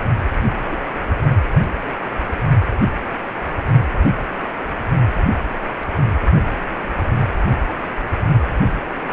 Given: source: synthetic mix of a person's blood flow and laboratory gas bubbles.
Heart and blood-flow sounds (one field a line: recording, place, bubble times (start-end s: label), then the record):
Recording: Doppler ultrasound of blood flow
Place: precordium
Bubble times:
0.71-0.76 s: bubbles
1.30-1.38 s: bubbles
From the record:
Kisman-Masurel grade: 122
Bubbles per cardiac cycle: 1 to 2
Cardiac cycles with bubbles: 10 to 50%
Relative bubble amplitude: moderate (0.250 to 0.450)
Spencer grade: 2 (many but less than half of the cardiac periods contain bubble signals, singularly or in groups)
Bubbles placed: anywhere in the cardiac cycle